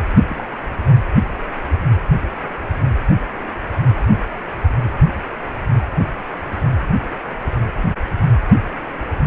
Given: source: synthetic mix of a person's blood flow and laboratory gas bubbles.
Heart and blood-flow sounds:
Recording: Doppler ultrasound of blood flow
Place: precordium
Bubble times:
0.29-0.43 s: bubbles
From the record:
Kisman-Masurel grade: 111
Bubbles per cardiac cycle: 1 to 2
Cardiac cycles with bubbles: 1 to 10%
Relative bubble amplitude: barely perceptible (0.100 to 0.250)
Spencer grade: 1 (occasional bubble signal discernible with the cardiac motion signal, with majority of cardiac periods free of bubbles)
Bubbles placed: anywhere in the cardiac cycle

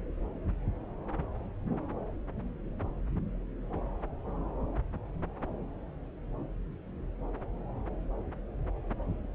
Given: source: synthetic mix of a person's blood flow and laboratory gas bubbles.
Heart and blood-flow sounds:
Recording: Doppler ultrasound of blood flow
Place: subclavian vein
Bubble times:
no bubbles
From the record:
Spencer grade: 0 (complete lack of bubble signals)

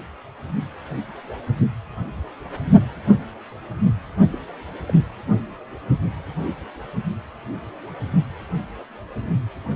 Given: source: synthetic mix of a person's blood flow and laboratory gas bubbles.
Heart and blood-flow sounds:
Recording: Doppler ultrasound of blood flow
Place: precordium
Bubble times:
4.33-4.38 s: bubbles
4.89-4.91 s: bubbles
From the record:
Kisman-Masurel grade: 111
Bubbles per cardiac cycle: 1 to 2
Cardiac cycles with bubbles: 1 to 10%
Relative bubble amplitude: barely perceptible (0.100 to 0.250)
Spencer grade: 1 (occasional bubble signal discernible with the cardiac motion signal, with majority of cardiac periods free of bubbles)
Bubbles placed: anywhere in the cardiac cycle

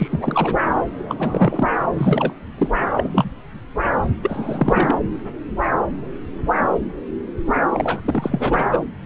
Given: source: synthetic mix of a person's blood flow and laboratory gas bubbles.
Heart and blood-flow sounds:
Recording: Doppler ultrasound of blood flow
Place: subclavian vein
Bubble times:
0.00-0.55 s: bubbles
0.98-1.69 s: bubbles
1.94-2.33 s: bubbles
2.58-2.73 s: bubbles
2.80-2.85 s: bubbles
2.97-3.31 s: bubbles
4.21-4.96 s: bubbles
7.70-8.00 s: bubbles
8.04-8.63 s: bubbles
8.71-8.79 s: bubbles
From the record:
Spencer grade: 3 (all of the cardiac periods contain showers or single bubble signals, but not dominating or overriding the cardiac motion signals)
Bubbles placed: anywhere in the cardiac cycle

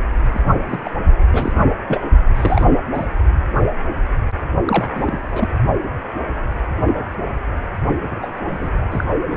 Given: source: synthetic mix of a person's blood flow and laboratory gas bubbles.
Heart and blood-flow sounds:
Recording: Doppler ultrasound of blood flow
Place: precordium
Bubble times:
0.33-0.43 s: bubbles
0.66-0.91 s: bubbles
1.31-1.52 s: bubbles
1.88-2.02 s: bubbles
2.35-2.65 s: bubbles
2.93-3.08 s: bubbles
4.64-4.88 s: bubbles
4.95-5.19 s: bubbles
5.23-5.48 s: bubbles
8.09-8.18 s: bubbles
8.21-8.28 s: bubbles
8.48-8.70 s: bubbles
8.91-9.04 s: bubbles
9.30-9.37 s: bubbles
From the record:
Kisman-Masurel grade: 222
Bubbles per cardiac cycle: several, 3 to 8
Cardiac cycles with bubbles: 10 to 50%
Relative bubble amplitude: moderate (0.250 to 0.450)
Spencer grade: 2 (many but less than half of the cardiac periods contain bubble signals, singularly or in groups)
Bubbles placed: only in the low amplitude regions of the cardiac cycle

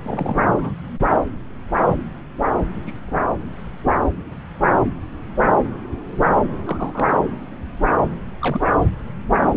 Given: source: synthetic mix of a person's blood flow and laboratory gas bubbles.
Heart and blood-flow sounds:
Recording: Doppler ultrasound of blood flow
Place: subclavian vein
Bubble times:
0.03-0.42 s: bubbles
0.55-0.73 s: bubbles
2.86-2.92 s: bubbles
3.07-3.19 s: bubbles
6.65-7.11 s: bubbles
8.41-8.62 s: bubbles
From the record:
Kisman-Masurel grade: 121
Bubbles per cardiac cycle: 1 to 2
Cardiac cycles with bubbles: 10 to 50%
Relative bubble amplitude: barely perceptible (0.100 to 0.250)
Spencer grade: 2 (many but less than half of the cardiac periods contain bubble signals, singularly or in groups)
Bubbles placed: anywhere in the cardiac cycle

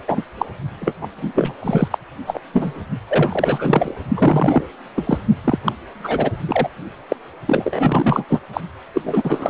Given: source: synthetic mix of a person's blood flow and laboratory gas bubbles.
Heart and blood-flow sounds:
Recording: Doppler ultrasound of blood flow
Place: precordium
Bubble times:
0.08-0.22 s: bubbles
0.38-0.46 s: bubbles
0.81-0.94 s: bubbles
1.01-1.07 s: bubbles
1.16-1.53 s: bubbles
1.60-1.88 s: bubbles
1.91-1.98 s: bubbles
2.27-2.40 s: bubbles
2.53-2.83 s: bubbles
3.08-3.94 s: bubbles
4.16-4.68 s: bubbles
4.96-5.19 s: bubbles
5.44-5.58 s: bubbles
5.64-5.73 s: bubbles
6.03-6.30 s: bubbles
6.48-6.69 s: bubbles
7.08-7.16 s: bubbles
7.46-8.25 s: bubbles
8.29-8.39 s: bubbles
8.53-8.61 s: bubbles
8.94-9.02 s: bubbles
9.04-9.50 s: bubbles
From the record:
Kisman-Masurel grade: 343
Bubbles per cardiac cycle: rolling drumbeat, 9 or more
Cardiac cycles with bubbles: 100%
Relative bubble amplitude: loud (0.450 to 0.775)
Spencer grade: 3 (all of the cardiac periods contain showers or single bubble signals, but not dominating or overriding the cardiac motion signals)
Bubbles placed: only in the low amplitude regions of the cardiac cycle

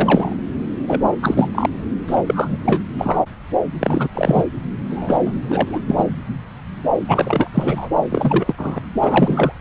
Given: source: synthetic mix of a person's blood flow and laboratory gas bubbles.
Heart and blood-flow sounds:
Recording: Doppler ultrasound of blood flow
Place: subclavian vein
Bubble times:
0.00-0.37 s: bubbles
0.86-1.01 s: bubbles
1.22-1.50 s: bubbles
1.54-1.70 s: bubbles
2.06-2.23 s: bubbles
2.26-2.83 s: bubbles
2.98-3.20 s: bubbles
3.79-4.08 s: bubbles
4.13-4.45 s: bubbles
4.90-5.20 s: bubbles
5.25-5.32 s: bubbles
5.49-5.79 s: bubbles
5.88-6.04 s: bubbles
7.08-7.50 s: bubbles
7.54-7.88 s: bubbles
8.10-8.54 s: bubbles
8.57-8.81 s: bubbles
9.01-9.52 s: bubbles
From the record:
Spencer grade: 3 (all of the cardiac periods contain showers or single bubble signals, but not dominating or overriding the cardiac motion signals)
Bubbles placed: anywhere in the cardiac cycle

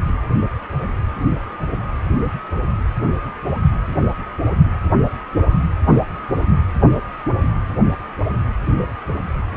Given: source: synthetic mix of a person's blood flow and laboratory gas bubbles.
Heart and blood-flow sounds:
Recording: Doppler ultrasound of blood flow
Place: precordium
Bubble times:
no bubbles
From the record:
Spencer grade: 0 (complete lack of bubble signals)

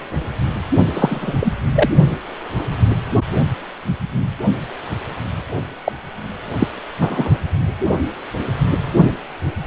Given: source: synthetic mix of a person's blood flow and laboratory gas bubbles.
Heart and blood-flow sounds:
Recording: Doppler ultrasound of blood flow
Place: precordium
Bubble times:
0.93-1.53 s: bubbles
1.75-1.89 s: bubbles
5.84-5.92 s: bubbles
6.58-6.68 s: bubbles
7.00-7.29 s: bubbles
From the record:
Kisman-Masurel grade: 223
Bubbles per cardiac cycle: several, 3 to 8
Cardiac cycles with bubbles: 10 to 50%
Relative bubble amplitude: loud (0.450 to 0.775)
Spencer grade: 2 (many but less than half of the cardiac periods contain bubble signals, singularly or in groups)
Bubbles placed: only in the low amplitude regions of the cardiac cycle

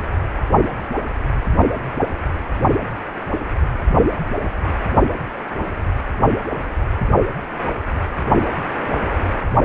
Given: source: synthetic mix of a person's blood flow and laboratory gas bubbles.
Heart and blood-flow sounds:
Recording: Doppler ultrasound of blood flow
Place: precordium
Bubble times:
no bubbles
From the record:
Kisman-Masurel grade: 000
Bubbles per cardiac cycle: 0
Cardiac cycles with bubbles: 0%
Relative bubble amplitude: no bubbles discernible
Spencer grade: 0 (complete lack of bubble signals)

